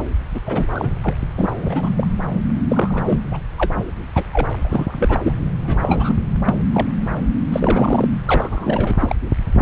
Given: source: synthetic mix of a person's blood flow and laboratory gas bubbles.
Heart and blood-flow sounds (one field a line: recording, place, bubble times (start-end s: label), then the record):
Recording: Doppler ultrasound of blood flow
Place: subclavian vein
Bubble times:
0.34-0.41 s: bubbles
0.46-0.67 s: bubbles
0.73-0.94 s: bubbles
1.01-1.14 s: bubbles
1.38-2.07 s: bubbles
2.69-3.20 s: bubbles
3.31-3.40 s: bubbles
3.58-3.85 s: bubbles
4.14-4.23 s: bubbles
4.25-4.29 s: bubbles
4.33-5.32 s: bubbles
5.63-6.18 s: bubbles
6.45-6.55 s: bubbles
6.72-6.89 s: bubbles
7.14-7.18 s: bubbles
7.52-8.09 s: bubbles
8.26-8.97 s: bubbles
9.00-9.16 s: bubbles
9.57-9.62 s: bubbles
From the record:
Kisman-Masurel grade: 342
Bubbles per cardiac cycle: rolling drumbeat, 9 or more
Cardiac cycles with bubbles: 100%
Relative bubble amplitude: moderate (0.250 to 0.450)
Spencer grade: 3 (all of the cardiac periods contain showers or single bubble signals, but not dominating or overriding the cardiac motion signals)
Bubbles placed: anywhere in the cardiac cycle